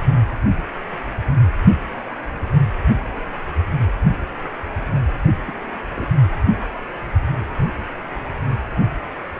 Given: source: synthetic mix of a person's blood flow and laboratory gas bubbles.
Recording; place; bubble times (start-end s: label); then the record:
Doppler ultrasound of blood flow; precordium
5.47-5.52 s: bubbles
5.95-6.07 s: bubbles
From the record:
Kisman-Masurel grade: 121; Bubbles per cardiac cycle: 1 to 2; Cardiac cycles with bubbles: 10 to 50%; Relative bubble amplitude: barely perceptible (0.100 to 0.250); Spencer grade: 2 (many but less than half of the cardiac periods contain bubble signals, singularly or in groups); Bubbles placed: anywhere in the cardiac cycle